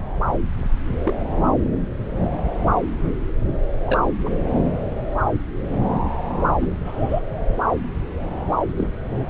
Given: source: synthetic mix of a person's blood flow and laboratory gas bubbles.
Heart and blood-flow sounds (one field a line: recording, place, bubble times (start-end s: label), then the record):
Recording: Doppler ultrasound of blood flow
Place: subclavian vein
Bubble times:
1.03-1.15 s: bubbles
3.86-4.00 s: bubbles
4.25-4.30 s: bubbles
6.61-6.67 s: bubbles
6.85-7.21 s: bubbles
8.78-8.87 s: bubbles
From the record:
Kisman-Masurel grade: 121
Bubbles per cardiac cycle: 1 to 2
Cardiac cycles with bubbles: 10 to 50%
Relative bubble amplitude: barely perceptible (0.100 to 0.250)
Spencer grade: 2 (many but less than half of the cardiac periods contain bubble signals, singularly or in groups)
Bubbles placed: anywhere in the cardiac cycle